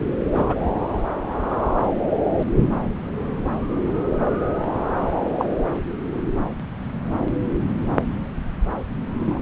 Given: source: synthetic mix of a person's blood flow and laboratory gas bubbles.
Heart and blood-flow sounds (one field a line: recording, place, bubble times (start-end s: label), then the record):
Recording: Doppler ultrasound of blood flow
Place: subclavian vein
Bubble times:
0.33-0.55 s: bubbles
5.38-5.44 s: bubbles
9.20-9.38 s: bubbles
From the record:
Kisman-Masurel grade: 122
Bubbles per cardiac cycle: 1 to 2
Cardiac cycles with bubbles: 10 to 50%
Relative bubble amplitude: moderate (0.250 to 0.450)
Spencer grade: 2 (many but less than half of the cardiac periods contain bubble signals, singularly or in groups)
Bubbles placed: anywhere in the cardiac cycle